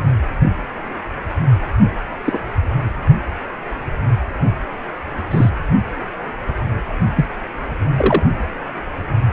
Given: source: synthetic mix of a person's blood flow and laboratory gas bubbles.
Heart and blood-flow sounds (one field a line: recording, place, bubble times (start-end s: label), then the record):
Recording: Doppler ultrasound of blood flow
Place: precordium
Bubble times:
2.25-2.39 s: bubbles
5.30-5.49 s: bubbles
7.16-7.26 s: bubbles
7.96-8.23 s: bubbles
From the record:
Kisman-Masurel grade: 123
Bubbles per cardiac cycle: 1 to 2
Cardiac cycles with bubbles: 10 to 50%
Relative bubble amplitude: loud (0.450 to 0.775)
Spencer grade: 2 (many but less than half of the cardiac periods contain bubble signals, singularly or in groups)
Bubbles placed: only in the low amplitude regions of the cardiac cycle